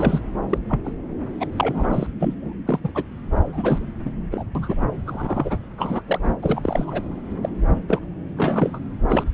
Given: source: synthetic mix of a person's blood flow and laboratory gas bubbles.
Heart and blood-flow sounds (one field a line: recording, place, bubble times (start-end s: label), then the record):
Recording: Doppler ultrasound of blood flow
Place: subclavian vein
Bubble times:
0.00-0.20 s: bubbles
0.49-0.58 s: bubbles
0.70-0.80 s: bubbles
0.84-0.92 s: bubbles
1.40-1.47 s: bubbles
1.56-2.06 s: bubbles
2.19-2.35 s: bubbles
2.42-2.54 s: bubbles
2.67-2.79 s: bubbles
2.83-2.92 s: bubbles
2.94-3.04 s: bubbles
3.49-3.86 s: bubbles
4.04-4.12 s: bubbles
4.31-4.44 s: bubbles
4.55-4.86 s: bubbles
5.06-5.63 s: bubbles
5.77-6.02 s: bubbles
6.07-6.19 s: bubbles
6.23-6.36 s: bubbles
6.42-7.03 s: bubbles
7.42-7.49 s: bubbles
7.88-8.00 s: bubbles
8.37-8.79 s: bubbles
9.09-9.24 s: bubbles
From the record:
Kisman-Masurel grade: 242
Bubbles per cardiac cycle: several, 3 to 8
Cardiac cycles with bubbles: 100%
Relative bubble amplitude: moderate (0.250 to 0.450)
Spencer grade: 3 (all of the cardiac periods contain showers or single bubble signals, but not dominating or overriding the cardiac motion signals)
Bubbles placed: anywhere in the cardiac cycle